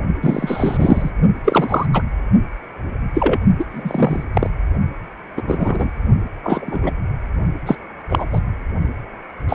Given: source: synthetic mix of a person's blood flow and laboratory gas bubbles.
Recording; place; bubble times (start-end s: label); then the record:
Doppler ultrasound of blood flow; precordium
0.22-1.10 s: bubbles
1.44-1.86 s: bubbles
1.93-2.02 s: bubbles
3.14-3.39 s: bubbles
3.58-3.65 s: bubbles
3.69-4.24 s: bubbles
4.33-4.50 s: bubbles
5.36-5.42 s: bubbles
5.47-5.89 s: bubbles
6.43-6.91 s: bubbles
7.65-7.75 s: bubbles
8.10-8.25 s: bubbles
8.32-8.40 s: bubbles
9.48-9.55 s: bubbles
From the record:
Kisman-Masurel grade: 233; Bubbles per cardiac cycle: several, 3 to 8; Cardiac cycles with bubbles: 50 to 99%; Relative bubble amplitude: loud (0.450 to 0.775); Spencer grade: 3 (all of the cardiac periods contain showers or single bubble signals, but not dominating or overriding the cardiac motion signals); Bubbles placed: only in the low amplitude regions of the cardiac cycle